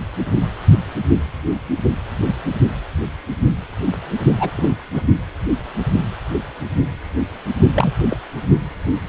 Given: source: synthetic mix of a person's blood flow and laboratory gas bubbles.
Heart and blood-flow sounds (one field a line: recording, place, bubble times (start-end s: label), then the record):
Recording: Doppler ultrasound of blood flow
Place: precordium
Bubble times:
4.40-4.50 s: bubbles
4.55-4.71 s: bubbles
4.94-5.02 s: bubbles
7.74-7.91 s: bubbles
8.10-8.16 s: bubbles
From the record:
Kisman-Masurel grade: 222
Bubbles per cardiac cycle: several, 3 to 8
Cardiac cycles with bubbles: 10 to 50%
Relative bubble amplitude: moderate (0.250 to 0.450)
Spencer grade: 2 (many but less than half of the cardiac periods contain bubble signals, singularly or in groups)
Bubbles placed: only in the low amplitude regions of the cardiac cycle